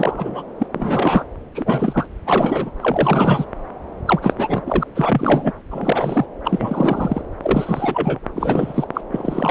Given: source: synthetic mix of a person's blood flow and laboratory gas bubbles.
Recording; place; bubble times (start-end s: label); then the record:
Doppler ultrasound of blood flow; subclavian vein
0.00-0.42 s: bubbles
0.59-0.67 s: bubbles
0.74-1.24 s: bubbles
1.55-2.06 s: bubbles
2.26-2.71 s: bubbles
2.81-3.45 s: bubbles
4.07-4.34 s: bubbles
4.38-4.61 s: bubbles
4.66-4.83 s: bubbles
4.95-5.52 s: bubbles
5.70-6.25 s: bubbles
6.44-7.21 s: bubbles
7.43-8.19 s: bubbles
8.36-8.87 s: bubbles
8.94-9.01 s: bubbles
9.12-9.51 s: bubbles
From the record:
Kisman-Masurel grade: 342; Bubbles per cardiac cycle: rolling drumbeat, 9 or more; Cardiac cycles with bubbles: 100%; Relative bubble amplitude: moderate (0.250 to 0.450); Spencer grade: 3 (all of the cardiac periods contain showers or single bubble signals, but not dominating or overriding the cardiac motion signals); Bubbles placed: anywhere in the cardiac cycle